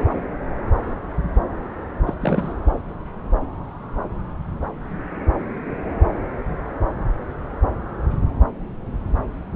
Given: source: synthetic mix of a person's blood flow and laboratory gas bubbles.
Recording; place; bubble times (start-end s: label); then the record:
Doppler ultrasound of blood flow; subclavian vein
2.06-2.14 s: bubbles
2.21-2.53 s: bubbles
From the record:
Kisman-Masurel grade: 212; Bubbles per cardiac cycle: several, 3 to 8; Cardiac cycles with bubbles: 1 to 10%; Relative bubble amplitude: moderate (0.250 to 0.450); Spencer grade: 1 (occasional bubble signal discernible with the cardiac motion signal, with majority of cardiac periods free of bubbles); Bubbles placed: anywhere in the cardiac cycle